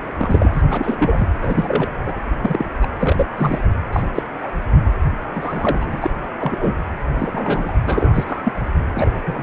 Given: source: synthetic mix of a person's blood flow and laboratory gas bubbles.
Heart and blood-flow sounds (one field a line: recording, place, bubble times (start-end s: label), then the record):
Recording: Doppler ultrasound of blood flow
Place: precordium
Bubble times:
0.18-0.63 s: bubbles
0.70-1.28 s: bubbles
1.41-1.92 s: bubbles
2.06-2.13 s: bubbles
2.43-2.66 s: bubbles
2.81-2.88 s: bubbles
3.00-3.26 s: bubbles
3.38-3.62 s: bubbles
3.92-4.03 s: bubbles
4.14-4.22 s: bubbles
4.42-4.52 s: bubbles
5.33-6.11 s: bubbles
6.39-6.75 s: bubbles
7.18-7.72 s: bubbles
7.86-8.52 s: bubbles
8.94-9.21 s: bubbles
9.27-9.43 s: bubbles
From the record:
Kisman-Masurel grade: 242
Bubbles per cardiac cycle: several, 3 to 8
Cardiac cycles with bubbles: 100%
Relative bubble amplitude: moderate (0.250 to 0.450)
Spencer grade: 3 (all of the cardiac periods contain showers or single bubble signals, but not dominating or overriding the cardiac motion signals)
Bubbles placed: anywhere in the cardiac cycle